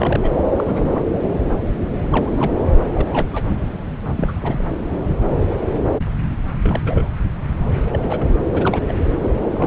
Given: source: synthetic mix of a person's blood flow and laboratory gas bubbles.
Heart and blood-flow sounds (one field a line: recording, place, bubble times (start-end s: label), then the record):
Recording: Doppler ultrasound of blood flow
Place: subclavian vein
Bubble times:
0.00-0.20 s: bubbles
0.23-0.31 s: bubbles
0.56-1.05 s: bubbles
2.11-2.31 s: bubbles
2.37-2.52 s: bubbles
2.94-3.27 s: bubbles
3.31-3.46 s: bubbles
4.17-4.39 s: bubbles
4.42-4.65 s: bubbles
6.63-7.09 s: bubbles
7.92-8.00 s: bubbles
8.04-8.35 s: bubbles
8.54-8.81 s: bubbles
8.88-8.94 s: bubbles
9.22-9.31 s: bubbles
9.42-9.67 s: bubbles
From the record:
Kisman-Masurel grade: 232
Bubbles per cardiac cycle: several, 3 to 8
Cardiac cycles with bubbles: 50 to 99%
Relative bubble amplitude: moderate (0.250 to 0.450)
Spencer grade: 3 (all of the cardiac periods contain showers or single bubble signals, but not dominating or overriding the cardiac motion signals)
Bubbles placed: anywhere in the cardiac cycle